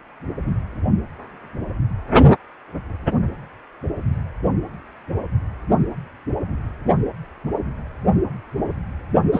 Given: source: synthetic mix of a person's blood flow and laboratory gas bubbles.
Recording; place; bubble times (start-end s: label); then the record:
Doppler ultrasound of blood flow; precordium
9.32-9.40 s: bubbles
From the record:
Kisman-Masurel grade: 113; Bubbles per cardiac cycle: 1 to 2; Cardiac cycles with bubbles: 1 to 10%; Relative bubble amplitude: loud (0.450 to 0.775); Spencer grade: 1 (occasional bubble signal discernible with the cardiac motion signal, with majority of cardiac periods free of bubbles); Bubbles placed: only in the low amplitude regions of the cardiac cycle